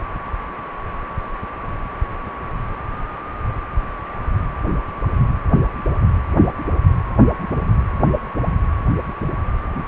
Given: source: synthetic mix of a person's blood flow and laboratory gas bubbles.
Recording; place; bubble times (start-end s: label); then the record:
Doppler ultrasound of blood flow; precordium
no bubbles
From the record:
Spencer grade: 0 (complete lack of bubble signals)